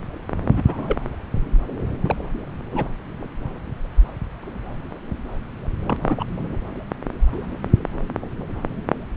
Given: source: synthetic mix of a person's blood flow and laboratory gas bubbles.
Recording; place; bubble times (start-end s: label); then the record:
Doppler ultrasound of blood flow; subclavian vein
0.43-0.99 s: bubbles
2.04-2.16 s: bubbles
2.72-2.89 s: bubbles
5.83-6.25 s: bubbles
From the record:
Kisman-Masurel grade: 222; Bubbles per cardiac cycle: several, 3 to 8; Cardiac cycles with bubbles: 10 to 50%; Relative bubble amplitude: moderate (0.250 to 0.450); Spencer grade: 2 (many but less than half of the cardiac periods contain bubble signals, singularly or in groups); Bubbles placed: anywhere in the cardiac cycle